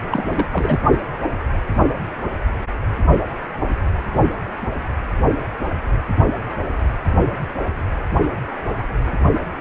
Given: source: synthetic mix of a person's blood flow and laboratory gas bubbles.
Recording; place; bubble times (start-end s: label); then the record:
Doppler ultrasound of blood flow; precordium
0.10-0.46 s: bubbles
0.53-0.80 s: bubbles
From the record:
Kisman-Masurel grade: 212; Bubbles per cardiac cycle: several, 3 to 8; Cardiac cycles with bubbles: 1 to 10%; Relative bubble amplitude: moderate (0.250 to 0.450); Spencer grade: 1 (occasional bubble signal discernible with the cardiac motion signal, with majority of cardiac periods free of bubbles); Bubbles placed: only in the low amplitude regions of the cardiac cycle